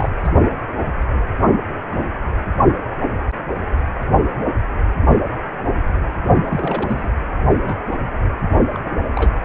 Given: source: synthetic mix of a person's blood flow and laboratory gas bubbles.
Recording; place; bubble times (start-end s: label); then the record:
Doppler ultrasound of blood flow; precordium
0.00-0.09 s: bubbles
0.24-0.32 s: bubbles
6.49-7.10 s: bubbles
7.66-7.75 s: bubbles
8.72-8.79 s: bubbles
8.84-9.02 s: bubbles
9.16-9.37 s: bubbles
From the record:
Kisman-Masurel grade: 222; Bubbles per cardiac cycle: several, 3 to 8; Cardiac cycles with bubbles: 10 to 50%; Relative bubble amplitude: moderate (0.250 to 0.450); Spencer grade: 2 (many but less than half of the cardiac periods contain bubble signals, singularly or in groups); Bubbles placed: only in the low amplitude regions of the cardiac cycle